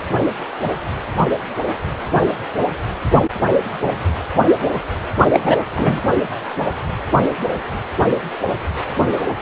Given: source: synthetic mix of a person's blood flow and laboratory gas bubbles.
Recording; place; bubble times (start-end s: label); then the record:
Doppler ultrasound of blood flow; precordium
5.33-5.57 s: bubbles
5.75-6.01 s: bubbles
From the record:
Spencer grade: 2 (many but less than half of the cardiac periods contain bubble signals, singularly or in groups); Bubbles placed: only in the low amplitude regions of the cardiac cycle